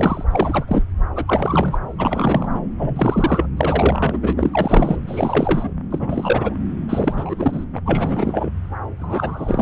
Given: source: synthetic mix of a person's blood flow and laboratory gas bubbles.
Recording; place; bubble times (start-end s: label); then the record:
Doppler ultrasound of blood flow; subclavian vein
0.00-0.24 s: bubbles
0.32-0.85 s: bubbles
1.16-1.78 s: bubbles
1.97-2.49 s: bubbles
2.54-2.60 s: bubbles
2.78-3.49 s: bubbles
3.57-4.19 s: bubbles
4.22-4.33 s: bubbles
4.37-4.96 s: bubbles
5.07-5.70 s: bubbles
5.90-6.55 s: bubbles
6.89-7.65 s: bubbles
7.74-7.78 s: bubbles
7.85-8.51 s: bubbles
9.00-9.62 s: bubbles
From the record:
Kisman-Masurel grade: 343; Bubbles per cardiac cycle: rolling drumbeat, 9 or more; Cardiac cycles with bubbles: 100%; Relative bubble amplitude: loud (0.450 to 0.775); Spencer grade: 3 (all of the cardiac periods contain showers or single bubble signals, but not dominating or overriding the cardiac motion signals); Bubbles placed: anywhere in the cardiac cycle